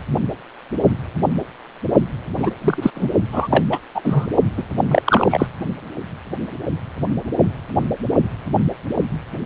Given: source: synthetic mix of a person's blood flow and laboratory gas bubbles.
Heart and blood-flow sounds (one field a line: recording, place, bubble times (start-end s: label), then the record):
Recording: Doppler ultrasound of blood flow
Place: precordium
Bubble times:
2.36-2.51 s: bubbles
2.61-2.90 s: bubbles
2.94-3.09 s: bubbles
3.32-3.47 s: bubbles
3.50-3.63 s: bubbles
3.70-3.79 s: bubbles
3.94-4.27 s: bubbles
4.57-4.62 s: bubbles
4.90-5.02 s: bubbles
5.06-5.46 s: bubbles
From the record:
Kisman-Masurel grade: 233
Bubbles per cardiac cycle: several, 3 to 8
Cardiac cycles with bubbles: 50 to 99%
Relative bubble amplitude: loud (0.450 to 0.775)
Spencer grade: 3 (all of the cardiac periods contain showers or single bubble signals, but not dominating or overriding the cardiac motion signals)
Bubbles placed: only in the low amplitude regions of the cardiac cycle